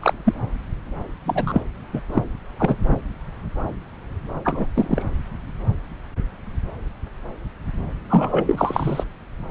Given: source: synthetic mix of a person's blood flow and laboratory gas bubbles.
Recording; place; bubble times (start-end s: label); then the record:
Doppler ultrasound of blood flow; subclavian vein
0.00-0.14 s: bubbles
0.25-0.34 s: bubbles
1.25-1.62 s: bubbles
1.93-2.01 s: bubbles
2.14-2.23 s: bubbles
2.57-2.76 s: bubbles
4.44-4.66 s: bubbles
4.74-5.03 s: bubbles
8.08-9.04 s: bubbles
From the record:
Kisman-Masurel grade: 233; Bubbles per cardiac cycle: several, 3 to 8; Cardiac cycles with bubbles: 50 to 99%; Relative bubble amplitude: loud (0.450 to 0.775); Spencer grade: 3 (all of the cardiac periods contain showers or single bubble signals, but not dominating or overriding the cardiac motion signals); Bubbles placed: anywhere in the cardiac cycle